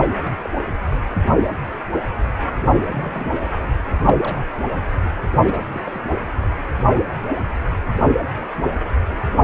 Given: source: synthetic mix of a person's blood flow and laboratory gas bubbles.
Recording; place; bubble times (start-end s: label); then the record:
Doppler ultrasound of blood flow; precordium
0.00-0.16 s: bubbles
0.25-0.37 s: bubbles
0.42-0.50 s: bubbles
2.85-3.60 s: bubbles
3.62-3.69 s: bubbles
4.01-4.17 s: bubbles
4.23-4.39 s: bubbles
5.44-5.63 s: bubbles
5.71-5.82 s: bubbles
5.86-6.02 s: bubbles
From the record:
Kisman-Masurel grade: 221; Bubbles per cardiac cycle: several, 3 to 8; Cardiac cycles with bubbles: 10 to 50%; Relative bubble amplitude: barely perceptible (0.100 to 0.250); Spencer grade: 2 (many but less than half of the cardiac periods contain bubble signals, singularly or in groups); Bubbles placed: anywhere in the cardiac cycle